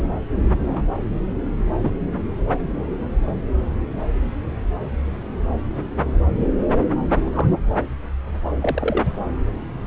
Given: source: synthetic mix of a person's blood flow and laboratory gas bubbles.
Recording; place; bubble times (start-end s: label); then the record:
Doppler ultrasound of blood flow; subclavian vein
0.46-0.84 s: bubbles
1.83-1.91 s: bubbles
7.13-7.53 s: bubbles
8.61-9.03 s: bubbles
From the record:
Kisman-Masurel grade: 122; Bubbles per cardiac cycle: 1 to 2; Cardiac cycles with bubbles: 10 to 50%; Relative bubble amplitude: moderate (0.250 to 0.450); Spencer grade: 2 (many but less than half of the cardiac periods contain bubble signals, singularly or in groups); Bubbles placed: anywhere in the cardiac cycle